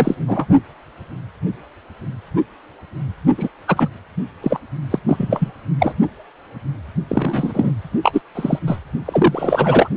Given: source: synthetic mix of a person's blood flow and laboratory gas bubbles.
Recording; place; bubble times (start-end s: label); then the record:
Doppler ultrasound of blood flow; precordium
0.00-0.46 s: bubbles
3.37-3.49 s: bubbles
3.68-3.89 s: bubbles
4.42-4.60 s: bubbles
4.91-4.99 s: bubbles
5.08-5.52 s: bubbles
5.79-5.94 s: bubbles
7.08-7.71 s: bubbles
8.03-8.21 s: bubbles
8.35-8.59 s: bubbles
8.67-8.79 s: bubbles
9.05-9.89 s: bubbles
From the record:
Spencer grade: 3 (all of the cardiac periods contain showers or single bubble signals, but not dominating or overriding the cardiac motion signals); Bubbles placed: only in the low amplitude regions of the cardiac cycle